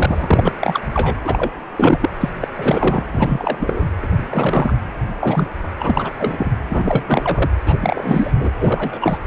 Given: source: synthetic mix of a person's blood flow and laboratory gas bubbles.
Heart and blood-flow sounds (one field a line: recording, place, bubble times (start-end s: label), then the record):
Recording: Doppler ultrasound of blood flow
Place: precordium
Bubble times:
0.00-0.53 s: bubbles
0.60-0.81 s: bubbles
0.94-1.15 s: bubbles
1.25-1.52 s: bubbles
1.76-2.10 s: bubbles
2.20-2.29 s: bubbles
2.40-2.48 s: bubbles
2.56-3.05 s: bubbles
3.11-3.88 s: bubbles
4.02-4.75 s: bubbles
5.20-5.48 s: bubbles
5.63-5.68 s: bubbles
5.79-6.11 s: bubbles
6.18-6.51 s: bubbles
6.70-7.50 s: bubbles
7.66-7.77 s: bubbles
7.81-8.31 s: bubbles
8.36-8.51 s: bubbles
8.59-9.18 s: bubbles
From the record:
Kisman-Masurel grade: 343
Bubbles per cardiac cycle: rolling drumbeat, 9 or more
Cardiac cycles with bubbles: 100%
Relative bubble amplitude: loud (0.450 to 0.775)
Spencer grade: 3 (all of the cardiac periods contain showers or single bubble signals, but not dominating or overriding the cardiac motion signals)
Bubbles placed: anywhere in the cardiac cycle